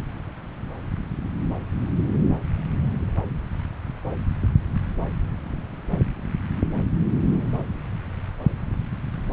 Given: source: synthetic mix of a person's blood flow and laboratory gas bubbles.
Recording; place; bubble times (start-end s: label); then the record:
Doppler ultrasound of blood flow; subclavian vein
no bubbles
From the record:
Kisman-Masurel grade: 000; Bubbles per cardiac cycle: 0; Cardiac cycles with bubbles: 0%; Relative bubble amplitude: no bubbles discernible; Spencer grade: 0 (complete lack of bubble signals)